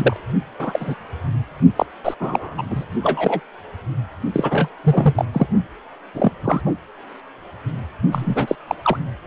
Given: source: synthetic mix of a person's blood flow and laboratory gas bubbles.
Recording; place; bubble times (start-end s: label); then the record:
Doppler ultrasound of blood flow; precordium
0.00-0.17 s: bubbles
0.59-0.95 s: bubbles
1.76-1.86 s: bubbles
2.04-2.14 s: bubbles
2.20-2.62 s: bubbles
2.70-2.84 s: bubbles
3.03-3.41 s: bubbles
4.33-4.69 s: bubbles
4.84-5.25 s: bubbles
5.33-5.46 s: bubbles
6.14-6.31 s: bubbles
6.44-6.61 s: bubbles
6.66-6.74 s: bubbles
8.12-8.55 s: bubbles
8.67-8.75 s: bubbles
8.82-8.97 s: bubbles
From the record:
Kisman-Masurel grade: 243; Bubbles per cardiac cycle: several, 3 to 8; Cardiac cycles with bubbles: 100%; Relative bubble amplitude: loud (0.450 to 0.775); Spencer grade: 3 (all of the cardiac periods contain showers or single bubble signals, but not dominating or overriding the cardiac motion signals); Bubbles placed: only in the low amplitude regions of the cardiac cycle